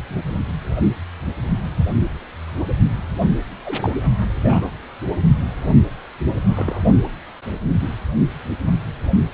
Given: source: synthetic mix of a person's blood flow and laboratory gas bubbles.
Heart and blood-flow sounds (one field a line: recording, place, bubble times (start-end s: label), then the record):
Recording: Doppler ultrasound of blood flow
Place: precordium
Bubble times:
3.65-3.97 s: bubbles
4.38-4.71 s: bubbles
6.48-6.82 s: bubbles
From the record:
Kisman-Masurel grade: 121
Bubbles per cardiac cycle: 1 to 2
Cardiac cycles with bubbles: 10 to 50%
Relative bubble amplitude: barely perceptible (0.100 to 0.250)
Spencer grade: 2 (many but less than half of the cardiac periods contain bubble signals, singularly or in groups)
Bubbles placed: only in the low amplitude regions of the cardiac cycle